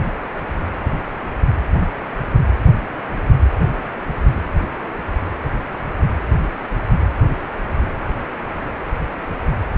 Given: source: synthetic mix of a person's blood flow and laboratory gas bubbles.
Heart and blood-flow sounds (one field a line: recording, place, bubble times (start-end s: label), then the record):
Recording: Doppler ultrasound of blood flow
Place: precordium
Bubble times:
no bubbles
From the record:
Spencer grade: 0 (complete lack of bubble signals)